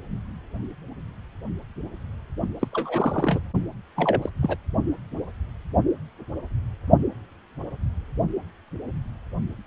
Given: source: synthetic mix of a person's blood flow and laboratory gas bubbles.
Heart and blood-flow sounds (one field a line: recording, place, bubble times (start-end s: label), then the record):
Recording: Doppler ultrasound of blood flow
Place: precordium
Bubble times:
2.60-2.68 s: bubbles
2.73-3.40 s: bubbles
3.96-4.29 s: bubbles
4.42-4.55 s: bubbles
From the record:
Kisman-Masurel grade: 222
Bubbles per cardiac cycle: several, 3 to 8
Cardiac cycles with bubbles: 10 to 50%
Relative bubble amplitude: moderate (0.250 to 0.450)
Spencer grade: 2 (many but less than half of the cardiac periods contain bubble signals, singularly or in groups)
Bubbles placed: only in the low amplitude regions of the cardiac cycle